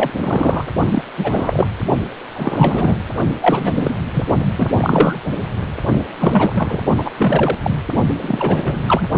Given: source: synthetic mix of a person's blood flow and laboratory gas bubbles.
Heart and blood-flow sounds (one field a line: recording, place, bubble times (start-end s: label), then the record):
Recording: Doppler ultrasound of blood flow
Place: precordium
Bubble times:
0.00-0.12 s: bubbles
0.16-0.65 s: bubbles
0.90-1.03 s: bubbles
1.17-1.67 s: bubbles
2.35-2.98 s: bubbles
3.42-3.94 s: bubbles
4.13-4.25 s: bubbles
4.57-5.21 s: bubbles
6.19-6.79 s: bubbles
6.97-7.10 s: bubbles
7.17-7.58 s: bubbles
7.63-7.80 s: bubbles
8.22-8.81 s: bubbles
8.88-9.09 s: bubbles
From the record:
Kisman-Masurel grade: 343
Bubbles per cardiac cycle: rolling drumbeat, 9 or more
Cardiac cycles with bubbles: 100%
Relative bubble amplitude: loud (0.450 to 0.775)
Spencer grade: 3 (all of the cardiac periods contain showers or single bubble signals, but not dominating or overriding the cardiac motion signals)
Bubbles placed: only in the low amplitude regions of the cardiac cycle